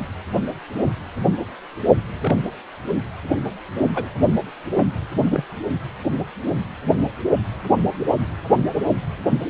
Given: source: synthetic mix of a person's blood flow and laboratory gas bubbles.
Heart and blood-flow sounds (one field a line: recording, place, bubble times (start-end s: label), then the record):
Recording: Doppler ultrasound of blood flow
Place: precordium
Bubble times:
2.21-2.36 s: bubbles
3.94-4.08 s: bubbles
4.77-4.83 s: bubbles
5.27-5.45 s: bubbles
From the record:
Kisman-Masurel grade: 122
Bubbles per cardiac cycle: 1 to 2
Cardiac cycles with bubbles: 10 to 50%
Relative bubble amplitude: moderate (0.250 to 0.450)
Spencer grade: 2 (many but less than half of the cardiac periods contain bubble signals, singularly or in groups)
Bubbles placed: anywhere in the cardiac cycle